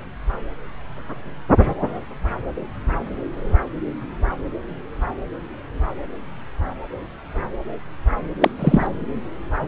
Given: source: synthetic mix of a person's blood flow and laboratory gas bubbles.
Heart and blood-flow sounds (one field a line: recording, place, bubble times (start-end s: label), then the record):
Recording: Doppler ultrasound of blood flow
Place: subclavian vein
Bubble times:
8.41-8.51 s: bubbles
8.59-8.87 s: bubbles
From the record:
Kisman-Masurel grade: 113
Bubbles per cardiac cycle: 1 to 2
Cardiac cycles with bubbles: 1 to 10%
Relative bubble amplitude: loud (0.450 to 0.775)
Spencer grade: 1 (occasional bubble signal discernible with the cardiac motion signal, with majority of cardiac periods free of bubbles)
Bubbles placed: anywhere in the cardiac cycle